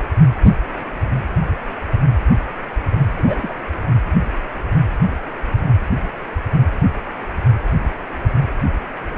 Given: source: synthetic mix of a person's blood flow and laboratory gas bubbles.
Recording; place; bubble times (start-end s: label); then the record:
Doppler ultrasound of blood flow; precordium
3.17-3.53 s: bubbles
From the record:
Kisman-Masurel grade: 112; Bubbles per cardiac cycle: 1 to 2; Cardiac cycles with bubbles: 1 to 10%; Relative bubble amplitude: moderate (0.250 to 0.450); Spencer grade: 1 (occasional bubble signal discernible with the cardiac motion signal, with majority of cardiac periods free of bubbles); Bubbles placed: anywhere in the cardiac cycle